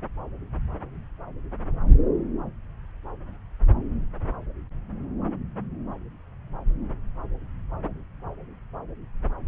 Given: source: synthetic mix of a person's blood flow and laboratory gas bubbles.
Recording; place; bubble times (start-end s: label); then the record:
Doppler ultrasound of blood flow; subclavian vein
no bubbles
From the record:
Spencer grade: 0 (complete lack of bubble signals)